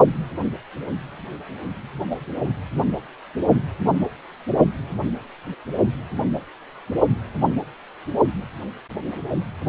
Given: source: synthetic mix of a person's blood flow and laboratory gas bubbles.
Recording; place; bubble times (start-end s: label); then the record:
Doppler ultrasound of blood flow; precordium
2.09-2.17 s: bubbles
From the record:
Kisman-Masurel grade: 112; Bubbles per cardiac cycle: 1 to 2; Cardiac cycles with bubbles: 1 to 10%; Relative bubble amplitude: moderate (0.250 to 0.450); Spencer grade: 1 (occasional bubble signal discernible with the cardiac motion signal, with majority of cardiac periods free of bubbles); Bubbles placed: only in the low amplitude regions of the cardiac cycle